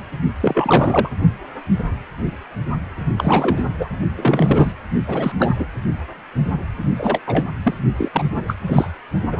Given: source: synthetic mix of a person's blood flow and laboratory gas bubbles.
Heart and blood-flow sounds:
Doppler ultrasound of blood flow; precordium
0.40-1.09 s: bubbles
3.17-3.65 s: bubbles
3.79-3.89 s: bubbles
4.17-4.72 s: bubbles
5.07-5.32 s: bubbles
5.38-5.55 s: bubbles
5.59-5.67 s: bubbles
6.96-7.21 s: bubbles
7.26-7.46 s: bubbles
7.64-7.76 s: bubbles
7.97-8.09 s: bubbles
8.13-8.23 s: bubbles
8.36-8.43 s: bubbles
8.46-8.57 s: bubbles
8.66-8.90 s: bubbles
9.32-9.40 s: bubbles
From the record:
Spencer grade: 3 (all of the cardiac periods contain showers or single bubble signals, but not dominating or overriding the cardiac motion signals); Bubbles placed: only in the low amplitude regions of the cardiac cycle

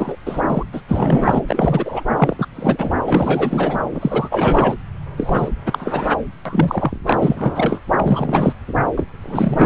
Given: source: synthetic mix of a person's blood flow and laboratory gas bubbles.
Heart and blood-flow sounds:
Doppler ultrasound of blood flow; subclavian vein
0.00-0.16 s: bubbles
0.26-0.42 s: bubbles
0.48-0.63 s: bubbles
0.72-0.81 s: bubbles
0.88-1.42 s: bubbles
1.48-2.04 s: bubbles
2.17-2.46 s: bubbles
2.55-2.93 s: bubbles
3.04-3.80 s: bubbles
3.94-4.75 s: bubbles
5.16-5.50 s: bubbles
5.65-6.12 s: bubbles
6.45-6.93 s: bubbles
7.04-7.80 s: bubbles
7.96-8.53 s: bubbles
8.96-9.04 s: bubbles
9.21-9.66 s: bubbles
From the record:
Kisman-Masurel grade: 343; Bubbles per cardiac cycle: rolling drumbeat, 9 or more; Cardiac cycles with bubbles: 100%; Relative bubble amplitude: loud (0.450 to 0.775); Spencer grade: 3 (all of the cardiac periods contain showers or single bubble signals, but not dominating or overriding the cardiac motion signals); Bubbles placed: anywhere in the cardiac cycle

